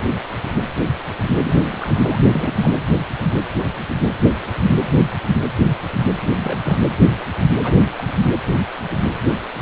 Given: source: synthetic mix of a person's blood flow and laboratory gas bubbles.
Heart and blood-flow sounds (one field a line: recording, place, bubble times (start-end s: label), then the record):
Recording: Doppler ultrasound of blood flow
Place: precordium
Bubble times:
1.44-2.56 s: bubbles
2.61-2.71 s: bubbles
6.38-6.77 s: bubbles
7.63-7.79 s: bubbles
7.83-7.90 s: bubbles
7.96-8.24 s: bubbles
From the record:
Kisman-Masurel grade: 221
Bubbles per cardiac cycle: several, 3 to 8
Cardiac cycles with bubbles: 10 to 50%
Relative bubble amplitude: barely perceptible (0.100 to 0.250)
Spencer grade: 2 (many but less than half of the cardiac periods contain bubble signals, singularly or in groups)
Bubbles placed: anywhere in the cardiac cycle